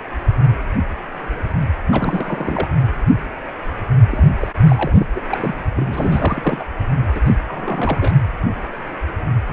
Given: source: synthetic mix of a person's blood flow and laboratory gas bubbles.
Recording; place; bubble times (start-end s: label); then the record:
Doppler ultrasound of blood flow; precordium
1.89-2.69 s: bubbles
4.12-4.29 s: bubbles
4.41-4.54 s: bubbles
4.68-4.93 s: bubbles
4.99-5.07 s: bubbles
5.15-5.22 s: bubbles
5.31-5.55 s: bubbles
5.74-6.66 s: bubbles
7.15-7.21 s: bubbles
7.24-7.35 s: bubbles
7.47-8.12 s: bubbles
From the record:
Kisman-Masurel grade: 332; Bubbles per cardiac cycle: rolling drumbeat, 9 or more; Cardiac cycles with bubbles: 50 to 99%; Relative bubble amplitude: moderate (0.250 to 0.450); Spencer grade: 3 (all of the cardiac periods contain showers or single bubble signals, but not dominating or overriding the cardiac motion signals); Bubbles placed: only in the low amplitude regions of the cardiac cycle